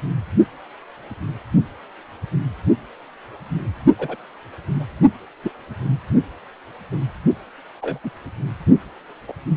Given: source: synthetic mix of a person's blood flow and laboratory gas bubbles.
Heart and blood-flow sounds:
Doppler ultrasound of blood flow; precordium
3.99-4.16 s: bubbles
4.75-4.84 s: bubbles
5.43-5.51 s: bubbles
7.81-7.98 s: bubbles
8.04-8.11 s: bubbles
9.28-9.33 s: bubbles
From the record:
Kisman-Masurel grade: 122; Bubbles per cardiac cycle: 1 to 2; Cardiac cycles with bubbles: 10 to 50%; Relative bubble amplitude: moderate (0.250 to 0.450); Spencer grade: 2 (many but less than half of the cardiac periods contain bubble signals, singularly or in groups); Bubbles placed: only in the low amplitude regions of the cardiac cycle

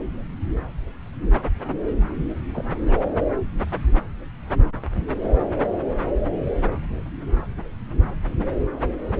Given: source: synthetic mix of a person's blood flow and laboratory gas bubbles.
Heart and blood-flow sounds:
Doppler ultrasound of blood flow; subclavian vein
2.54-2.66 s: bubbles
2.88-2.98 s: bubbles
From the record:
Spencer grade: 1 (occasional bubble signal discernible with the cardiac motion signal, with majority of cardiac periods free of bubbles); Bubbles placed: anywhere in the cardiac cycle

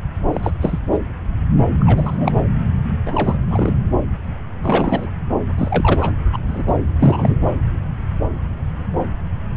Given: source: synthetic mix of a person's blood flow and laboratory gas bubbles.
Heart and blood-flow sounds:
Doppler ultrasound of blood flow; subclavian vein
0.33-0.50 s: bubbles
0.60-0.80 s: bubbles
0.92-0.98 s: bubbles
1.80-2.49 s: bubbles
3.06-3.39 s: bubbles
3.50-3.73 s: bubbles
4.62-5.08 s: bubbles
5.58-6.12 s: bubbles
6.32-6.38 s: bubbles
6.47-6.63 s: bubbles
6.67-6.73 s: bubbles
6.98-7.36 s: bubbles
From the record:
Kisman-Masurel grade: 223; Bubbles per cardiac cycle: several, 3 to 8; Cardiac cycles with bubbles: 10 to 50%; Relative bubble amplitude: loud (0.450 to 0.775); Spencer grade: 2 (many but less than half of the cardiac periods contain bubble signals, singularly or in groups); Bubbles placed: anywhere in the cardiac cycle

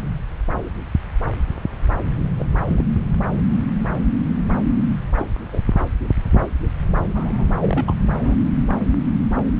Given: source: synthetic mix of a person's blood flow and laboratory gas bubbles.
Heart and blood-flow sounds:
Doppler ultrasound of blood flow; subclavian vein
2.39-2.45 s: bubbles
2.68-2.83 s: bubbles
5.18-5.27 s: bubbles
5.52-5.62 s: bubbles
7.14-7.45 s: bubbles
7.58-7.93 s: bubbles
8.25-8.35 s: bubbles
From the record:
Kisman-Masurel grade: 122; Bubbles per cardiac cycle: 1 to 2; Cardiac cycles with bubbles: 10 to 50%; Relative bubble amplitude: moderate (0.250 to 0.450); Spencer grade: 2 (many but less than half of the cardiac periods contain bubble signals, singularly or in groups); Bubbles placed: anywhere in the cardiac cycle

